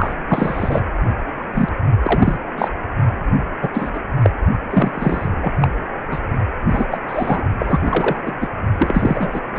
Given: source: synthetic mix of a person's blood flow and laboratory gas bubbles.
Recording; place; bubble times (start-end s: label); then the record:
Doppler ultrasound of blood flow; precordium
0.00-0.14 s: bubbles
0.28-0.82 s: bubbles
1.53-1.69 s: bubbles
2.02-2.38 s: bubbles
2.57-2.68 s: bubbles
3.62-3.69 s: bubbles
3.73-3.91 s: bubbles
3.94-4.00 s: bubbles
4.22-4.30 s: bubbles
4.70-5.29 s: bubbles
5.42-5.53 s: bubbles
5.61-5.68 s: bubbles
6.11-6.19 s: bubbles
6.69-6.86 s: bubbles
6.91-6.99 s: bubbles
7.08-7.42 s: bubbles
7.58-7.79 s: bubbles
7.85-8.21 s: bubbles
8.26-8.33 s: bubbles
8.40-8.49 s: bubbles
8.79-9.40 s: bubbles
9.55-9.59 s: bubbles
From the record:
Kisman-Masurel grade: 243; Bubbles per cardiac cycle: several, 3 to 8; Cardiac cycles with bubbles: 100%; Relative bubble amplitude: loud (0.450 to 0.775); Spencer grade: 3 (all of the cardiac periods contain showers or single bubble signals, but not dominating or overriding the cardiac motion signals); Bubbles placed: only in the low amplitude regions of the cardiac cycle